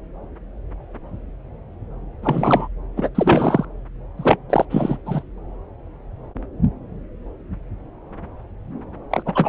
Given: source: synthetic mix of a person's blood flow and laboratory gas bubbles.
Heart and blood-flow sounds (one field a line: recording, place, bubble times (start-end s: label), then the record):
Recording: Doppler ultrasound of blood flow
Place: subclavian vein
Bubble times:
2.22-2.67 s: bubbles
2.96-3.09 s: bubbles
3.15-3.65 s: bubbles
4.17-4.38 s: bubbles
4.50-4.65 s: bubbles
4.70-4.97 s: bubbles
5.05-5.23 s: bubbles
9.11-9.22 s: bubbles
9.26-9.48 s: bubbles
From the record:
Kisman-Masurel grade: 333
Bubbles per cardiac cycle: rolling drumbeat, 9 or more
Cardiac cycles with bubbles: 50 to 99%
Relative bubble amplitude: loud (0.450 to 0.775)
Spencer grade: 3 (all of the cardiac periods contain showers or single bubble signals, but not dominating or overriding the cardiac motion signals)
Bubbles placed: anywhere in the cardiac cycle